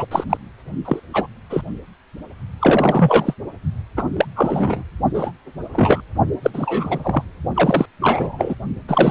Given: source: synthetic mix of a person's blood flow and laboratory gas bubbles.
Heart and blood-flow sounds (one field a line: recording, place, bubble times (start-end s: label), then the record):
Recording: Doppler ultrasound of blood flow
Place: precordium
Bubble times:
0.00-0.07 s: bubbles
0.11-0.24 s: bubbles
0.29-0.37 s: bubbles
0.85-0.99 s: bubbles
1.13-1.27 s: bubbles
1.50-1.62 s: bubbles
2.59-3.34 s: bubbles
3.97-4.04 s: bubbles
4.17-4.25 s: bubbles
4.36-4.84 s: bubbles
5.14-5.32 s: bubbles
5.73-6.02 s: bubbles
6.43-6.50 s: bubbles
6.54-7.25 s: bubbles
7.54-7.85 s: bubbles
8.01-8.54 s: bubbles
8.88-9.11 s: bubbles
From the record:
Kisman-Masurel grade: 243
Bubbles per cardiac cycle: several, 3 to 8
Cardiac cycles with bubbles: 100%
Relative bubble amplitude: loud (0.450 to 0.775)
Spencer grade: 3 (all of the cardiac periods contain showers or single bubble signals, but not dominating or overriding the cardiac motion signals)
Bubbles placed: only in the low amplitude regions of the cardiac cycle